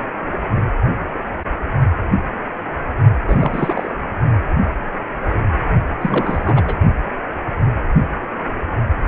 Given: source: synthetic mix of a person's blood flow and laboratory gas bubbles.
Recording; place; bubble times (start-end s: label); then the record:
Doppler ultrasound of blood flow; precordium
3.27-3.92 s: bubbles
6.01-6.74 s: bubbles
From the record:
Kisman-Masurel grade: 222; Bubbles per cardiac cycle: several, 3 to 8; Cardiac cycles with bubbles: 10 to 50%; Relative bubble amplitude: moderate (0.250 to 0.450); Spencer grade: 2 (many but less than half of the cardiac periods contain bubble signals, singularly or in groups); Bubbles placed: only in the low amplitude regions of the cardiac cycle